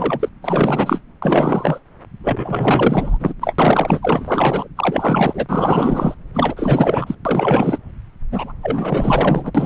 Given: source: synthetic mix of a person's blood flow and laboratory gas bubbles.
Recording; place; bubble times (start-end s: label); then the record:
Doppler ultrasound of blood flow; subclavian vein
0.00-0.29 s: bubbles
0.42-1.02 s: bubbles
1.22-1.79 s: bubbles
2.23-3.33 s: bubbles
3.41-3.54 s: bubbles
3.58-4.68 s: bubbles
4.76-5.46 s: bubbles
5.48-6.14 s: bubbles
6.33-7.15 s: bubbles
7.25-7.78 s: bubbles
8.31-8.53 s: bubbles
8.61-9.51 s: bubbles
9.54-9.65 s: bubbles
From the record:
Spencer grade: 4 (maximum detectable bubble signal sounding continuously throughout systole and diastole of every cardiac period, and overriding the amplitude of the normal cardiac signals); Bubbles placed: anywhere in the cardiac cycle